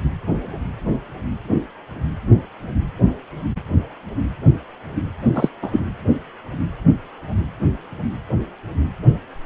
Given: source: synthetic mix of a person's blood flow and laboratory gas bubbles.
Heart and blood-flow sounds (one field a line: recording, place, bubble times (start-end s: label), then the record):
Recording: Doppler ultrasound of blood flow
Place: precordium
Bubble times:
5.35-5.49 s: bubbles
5.62-5.80 s: bubbles
From the record:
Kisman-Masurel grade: 213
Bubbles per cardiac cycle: several, 3 to 8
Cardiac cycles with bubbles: 1 to 10%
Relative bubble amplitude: loud (0.450 to 0.775)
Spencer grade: 1 (occasional bubble signal discernible with the cardiac motion signal, with majority of cardiac periods free of bubbles)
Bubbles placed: anywhere in the cardiac cycle